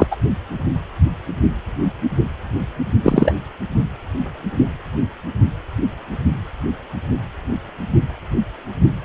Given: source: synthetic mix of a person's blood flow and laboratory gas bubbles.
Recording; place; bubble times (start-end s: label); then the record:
Doppler ultrasound of blood flow; precordium
0.00-0.07 s: bubbles
0.10-0.17 s: bubbles
3.02-3.35 s: bubbles
From the record:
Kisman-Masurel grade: 123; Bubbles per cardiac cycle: 1 to 2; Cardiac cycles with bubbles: 10 to 50%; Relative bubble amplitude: loud (0.450 to 0.775); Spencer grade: 2 (many but less than half of the cardiac periods contain bubble signals, singularly or in groups); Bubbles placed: only in the low amplitude regions of the cardiac cycle